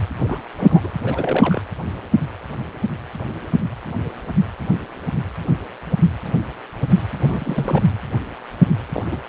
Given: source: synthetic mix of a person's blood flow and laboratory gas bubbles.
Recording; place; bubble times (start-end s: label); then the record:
Doppler ultrasound of blood flow; precordium
0.23-0.42 s: bubbles
0.56-0.80 s: bubbles
0.83-0.91 s: bubbles
1.04-1.62 s: bubbles
7.19-7.82 s: bubbles
8.92-9.03 s: bubbles
9.12-9.17 s: bubbles
From the record:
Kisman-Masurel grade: 221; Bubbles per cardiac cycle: several, 3 to 8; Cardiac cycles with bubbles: 10 to 50%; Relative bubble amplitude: barely perceptible (0.100 to 0.250); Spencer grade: 2 (many but less than half of the cardiac periods contain bubble signals, singularly or in groups); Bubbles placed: anywhere in the cardiac cycle